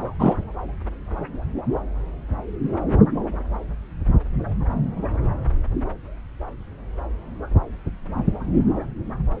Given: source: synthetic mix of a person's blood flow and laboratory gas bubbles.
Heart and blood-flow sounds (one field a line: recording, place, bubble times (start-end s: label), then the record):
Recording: Doppler ultrasound of blood flow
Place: subclavian vein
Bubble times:
0.19-0.35 s: bubbles
From the record:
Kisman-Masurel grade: 113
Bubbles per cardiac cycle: 1 to 2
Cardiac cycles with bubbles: 1 to 10%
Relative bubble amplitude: loud (0.450 to 0.775)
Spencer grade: 1 (occasional bubble signal discernible with the cardiac motion signal, with majority of cardiac periods free of bubbles)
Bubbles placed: anywhere in the cardiac cycle